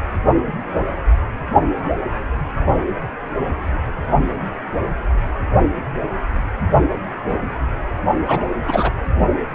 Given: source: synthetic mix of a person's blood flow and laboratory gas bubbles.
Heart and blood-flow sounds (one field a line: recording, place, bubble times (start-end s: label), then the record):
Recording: Doppler ultrasound of blood flow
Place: precordium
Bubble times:
8.25-8.44 s: bubbles
8.65-8.90 s: bubbles
From the record:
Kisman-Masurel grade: 213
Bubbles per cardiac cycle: several, 3 to 8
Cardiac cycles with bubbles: 1 to 10%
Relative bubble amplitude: loud (0.450 to 0.775)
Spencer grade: 1 (occasional bubble signal discernible with the cardiac motion signal, with majority of cardiac periods free of bubbles)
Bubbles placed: only in the low amplitude regions of the cardiac cycle